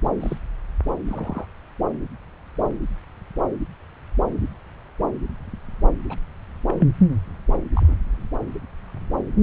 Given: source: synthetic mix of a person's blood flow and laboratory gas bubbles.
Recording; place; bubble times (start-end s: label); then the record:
Doppler ultrasound of blood flow; subclavian vein
0.19-0.38 s: bubbles
1.07-1.46 s: bubbles
6.09-6.17 s: bubbles
6.69-6.84 s: bubbles
7.74-7.97 s: bubbles
From the record:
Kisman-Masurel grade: 121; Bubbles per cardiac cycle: 1 to 2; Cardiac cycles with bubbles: 10 to 50%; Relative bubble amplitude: barely perceptible (0.100 to 0.250); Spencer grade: 2 (many but less than half of the cardiac periods contain bubble signals, singularly or in groups); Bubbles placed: anywhere in the cardiac cycle